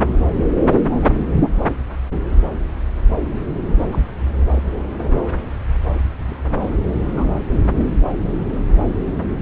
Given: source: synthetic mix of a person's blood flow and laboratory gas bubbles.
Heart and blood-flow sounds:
Doppler ultrasound of blood flow; subclavian vein
1.01-1.23 s: bubbles
3.41-3.45 s: bubbles
3.92-3.99 s: bubbles
6.28-6.37 s: bubbles
6.62-6.76 s: bubbles
7.16-7.25 s: bubbles
7.78-7.87 s: bubbles
From the record:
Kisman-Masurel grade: 121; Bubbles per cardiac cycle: 1 to 2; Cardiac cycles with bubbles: 10 to 50%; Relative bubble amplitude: barely perceptible (0.100 to 0.250); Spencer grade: 2 (many but less than half of the cardiac periods contain bubble signals, singularly or in groups); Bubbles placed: anywhere in the cardiac cycle

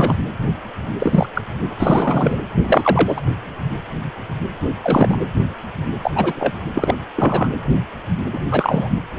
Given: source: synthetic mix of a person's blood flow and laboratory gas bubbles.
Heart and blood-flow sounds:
Doppler ultrasound of blood flow; precordium
0.00-0.16 s: bubbles
0.99-1.27 s: bubbles
1.34-1.42 s: bubbles
1.79-2.39 s: bubbles
2.64-3.21 s: bubbles
4.84-5.19 s: bubbles
6.03-6.11 s: bubbles
6.15-6.33 s: bubbles
6.38-6.54 s: bubbles
6.74-6.95 s: bubbles
7.16-7.47 s: bubbles
8.32-8.38 s: bubbles
8.51-8.92 s: bubbles
From the record:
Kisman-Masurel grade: 233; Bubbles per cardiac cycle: several, 3 to 8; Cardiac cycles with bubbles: 50 to 99%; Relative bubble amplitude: loud (0.450 to 0.775); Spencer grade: 3 (all of the cardiac periods contain showers or single bubble signals, but not dominating or overriding the cardiac motion signals); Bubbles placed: anywhere in the cardiac cycle

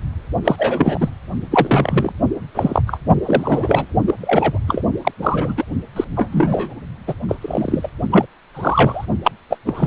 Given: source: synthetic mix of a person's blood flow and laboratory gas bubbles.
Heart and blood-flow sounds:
Doppler ultrasound of blood flow; precordium
0.44-1.09 s: bubbles
1.50-2.12 s: bubbles
2.54-2.82 s: bubbles
2.87-2.99 s: bubbles
3.25-3.94 s: bubbles
4.07-4.15 s: bubbles
4.21-4.58 s: bubbles
4.67-4.81 s: bubbles
5.04-5.12 s: bubbles
5.21-5.54 s: bubbles
5.57-5.65 s: bubbles
5.96-6.04 s: bubbles
6.16-6.28 s: bubbles
6.32-6.74 s: bubbles
7.07-7.13 s: bubbles
7.29-7.35 s: bubbles
7.41-7.90 s: bubbles
8.11-8.26 s: bubbles
8.54-9.05 s: bubbles
9.24-9.31 s: bubbles
9.50-9.57 s: bubbles
9.66-9.87 s: bubbles
From the record:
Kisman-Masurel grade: 243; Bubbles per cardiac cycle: several, 3 to 8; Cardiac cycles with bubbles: 100%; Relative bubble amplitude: loud (0.450 to 0.775); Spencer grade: 3 (all of the cardiac periods contain showers or single bubble signals, but not dominating or overriding the cardiac motion signals); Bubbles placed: only in the low amplitude regions of the cardiac cycle

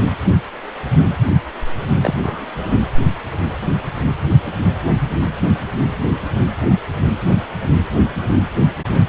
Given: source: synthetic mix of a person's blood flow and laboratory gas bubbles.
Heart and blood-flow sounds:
Doppler ultrasound of blood flow; precordium
2.01-2.14 s: bubbles
2.22-2.75 s: bubbles
From the record:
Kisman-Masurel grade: 212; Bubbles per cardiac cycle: several, 3 to 8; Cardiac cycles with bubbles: 1 to 10%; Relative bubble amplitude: moderate (0.250 to 0.450); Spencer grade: 1 (occasional bubble signal discernible with the cardiac motion signal, with majority of cardiac periods free of bubbles); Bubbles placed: anywhere in the cardiac cycle

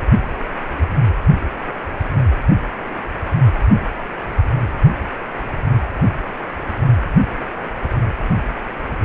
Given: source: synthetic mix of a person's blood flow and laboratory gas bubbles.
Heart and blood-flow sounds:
Doppler ultrasound of blood flow; precordium
no bubbles
From the record:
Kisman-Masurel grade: 000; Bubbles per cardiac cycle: 0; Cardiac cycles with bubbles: 0%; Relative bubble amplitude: no bubbles discernible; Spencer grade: 0 (complete lack of bubble signals)

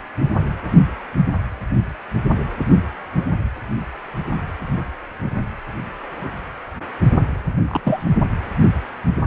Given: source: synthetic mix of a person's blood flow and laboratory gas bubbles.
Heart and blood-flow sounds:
Doppler ultrasound of blood flow; precordium
7.67-7.81 s: bubbles
7.84-8.05 s: bubbles
From the record:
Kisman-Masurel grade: 222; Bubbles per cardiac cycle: several, 3 to 8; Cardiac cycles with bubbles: 10 to 50%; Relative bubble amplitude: moderate (0.250 to 0.450); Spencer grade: 2 (many but less than half of the cardiac periods contain bubble signals, singularly or in groups); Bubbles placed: anywhere in the cardiac cycle

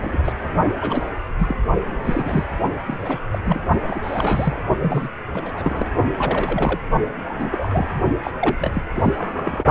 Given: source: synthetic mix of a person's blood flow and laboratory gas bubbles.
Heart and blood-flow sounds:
Doppler ultrasound of blood flow; precordium
0.00-0.32 s: bubbles
0.80-1.09 s: bubbles
1.39-1.56 s: bubbles
2.04-2.44 s: bubbles
2.87-3.20 s: bubbles
3.31-3.39 s: bubbles
3.46-3.66 s: bubbles
3.87-4.62 s: bubbles
4.82-5.08 s: bubbles
5.33-5.87 s: bubbles
6.17-6.79 s: bubbles
7.25-7.35 s: bubbles
7.39-8.00 s: bubbles
8.23-8.31 s: bubbles
8.40-8.57 s: bubbles
8.60-8.82 s: bubbles
8.93-9.13 s: bubbles
9.17-9.64 s: bubbles
From the record:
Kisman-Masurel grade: 342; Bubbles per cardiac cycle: rolling drumbeat, 9 or more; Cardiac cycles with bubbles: 100%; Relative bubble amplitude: moderate (0.250 to 0.450); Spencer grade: 3 (all of the cardiac periods contain showers or single bubble signals, but not dominating or overriding the cardiac motion signals); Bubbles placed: only in the low amplitude regions of the cardiac cycle

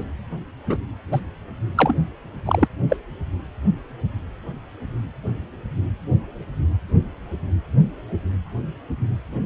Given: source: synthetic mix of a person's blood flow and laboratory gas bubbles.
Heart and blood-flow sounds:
Doppler ultrasound of blood flow; precordium
0.00-0.04 s: bubbles
0.67-0.78 s: bubbles
1.12-1.20 s: bubbles
1.76-1.94 s: bubbles
2.45-2.68 s: bubbles
2.89-2.96 s: bubbles
From the record:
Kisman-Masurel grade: 123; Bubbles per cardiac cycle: 1 to 2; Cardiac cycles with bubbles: 10 to 50%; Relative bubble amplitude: loud (0.450 to 0.775); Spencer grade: 2 (many but less than half of the cardiac periods contain bubble signals, singularly or in groups); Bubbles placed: anywhere in the cardiac cycle

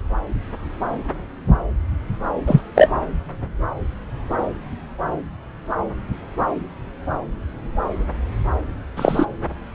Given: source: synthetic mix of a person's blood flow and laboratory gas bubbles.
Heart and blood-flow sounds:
Doppler ultrasound of blood flow; subclavian vein
2.46-2.61 s: bubbles
2.75-2.89 s: bubbles
8.96-9.26 s: bubbles
From the record:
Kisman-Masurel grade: 123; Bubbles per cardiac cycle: 1 to 2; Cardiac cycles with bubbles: 10 to 50%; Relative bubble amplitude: loud (0.450 to 0.775); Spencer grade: 2 (many but less than half of the cardiac periods contain bubble signals, singularly or in groups); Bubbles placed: anywhere in the cardiac cycle

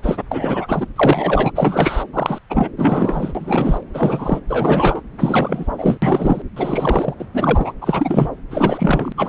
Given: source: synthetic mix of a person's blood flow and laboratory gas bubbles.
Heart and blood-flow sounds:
Doppler ultrasound of blood flow; subclavian vein
0.02-0.24 s: bubbles
0.31-0.86 s: bubbles
0.96-1.52 s: bubbles
1.55-2.04 s: bubbles
2.13-2.39 s: bubbles
2.50-2.69 s: bubbles
2.77-3.84 s: bubbles
3.94-4.39 s: bubbles
4.48-5.01 s: bubbles
5.19-5.97 s: bubbles
6.02-6.42 s: bubbles
6.56-7.14 s: bubbles
7.19-7.25 s: bubbles
7.33-7.73 s: bubbles
7.81-8.29 s: bubbles
8.50-9.12 s: bubbles
9.17-9.29 s: bubbles
From the record:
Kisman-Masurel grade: 343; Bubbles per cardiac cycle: rolling drumbeat, 9 or more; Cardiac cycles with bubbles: 100%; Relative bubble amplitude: loud (0.450 to 0.775); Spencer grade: 3 (all of the cardiac periods contain showers or single bubble signals, but not dominating or overriding the cardiac motion signals); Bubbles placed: anywhere in the cardiac cycle

